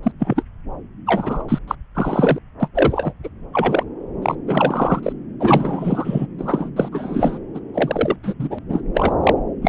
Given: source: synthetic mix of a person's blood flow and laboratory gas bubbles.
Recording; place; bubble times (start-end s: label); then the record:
Doppler ultrasound of blood flow; subclavian vein
0.03-0.11 s: bubbles
0.19-0.43 s: bubbles
1.06-1.43 s: bubbles
1.49-1.58 s: bubbles
1.68-1.75 s: bubbles
1.94-2.38 s: bubbles
2.60-2.69 s: bubbles
2.75-3.13 s: bubbles
3.23-3.29 s: bubbles
3.53-3.83 s: bubbles
4.22-4.36 s: bubbles
4.47-5.12 s: bubbles
5.39-6.26 s: bubbles
6.38-6.70 s: bubbles
6.76-6.88 s: bubbles
6.92-7.38 s: bubbles
7.54-7.60 s: bubbles
7.74-8.16 s: bubbles
8.23-8.34 s: bubbles
8.39-8.59 s: bubbles
8.69-8.82 s: bubbles
8.95-9.15 s: bubbles
9.23-9.34 s: bubbles
9.62-9.69 s: bubbles
From the record:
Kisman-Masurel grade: 243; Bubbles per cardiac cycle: several, 3 to 8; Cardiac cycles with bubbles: 100%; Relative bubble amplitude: loud (0.450 to 0.775); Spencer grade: 3 (all of the cardiac periods contain showers or single bubble signals, but not dominating or overriding the cardiac motion signals); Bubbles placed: anywhere in the cardiac cycle